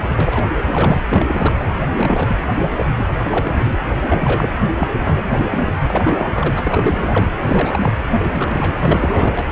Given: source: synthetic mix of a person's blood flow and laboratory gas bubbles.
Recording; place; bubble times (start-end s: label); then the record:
Doppler ultrasound of blood flow; precordium
0.07-0.50 s: bubbles
0.67-1.02 s: bubbles
1.08-1.25 s: bubbles
1.28-1.55 s: bubbles
1.96-2.48 s: bubbles
2.76-2.86 s: bubbles
2.96-3.76 s: bubbles
4.00-4.58 s: bubbles
4.79-4.91 s: bubbles
5.00-5.73 s: bubbles
5.87-7.29 s: bubbles
7.39-7.94 s: bubbles
8.10-9.48 s: bubbles
From the record:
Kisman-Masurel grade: 332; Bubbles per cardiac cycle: rolling drumbeat, 9 or more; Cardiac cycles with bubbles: 50 to 99%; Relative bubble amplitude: moderate (0.250 to 0.450); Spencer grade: 3 (all of the cardiac periods contain showers or single bubble signals, but not dominating or overriding the cardiac motion signals); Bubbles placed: anywhere in the cardiac cycle